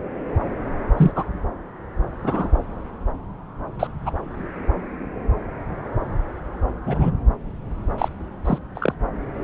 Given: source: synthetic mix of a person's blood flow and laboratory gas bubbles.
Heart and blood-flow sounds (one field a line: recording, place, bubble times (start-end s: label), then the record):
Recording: Doppler ultrasound of blood flow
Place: subclavian vein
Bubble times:
0.96-1.11 s: bubbles
1.16-1.24 s: bubbles
2.23-2.48 s: bubbles
3.79-3.87 s: bubbles
4.05-4.12 s: bubbles
6.85-7.12 s: bubbles
7.98-8.08 s: bubbles
8.45-8.58 s: bubbles
8.75-8.94 s: bubbles
From the record:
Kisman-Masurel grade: 123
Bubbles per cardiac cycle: 1 to 2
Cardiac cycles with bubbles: 10 to 50%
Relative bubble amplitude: loud (0.450 to 0.775)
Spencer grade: 2 (many but less than half of the cardiac periods contain bubble signals, singularly or in groups)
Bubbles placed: anywhere in the cardiac cycle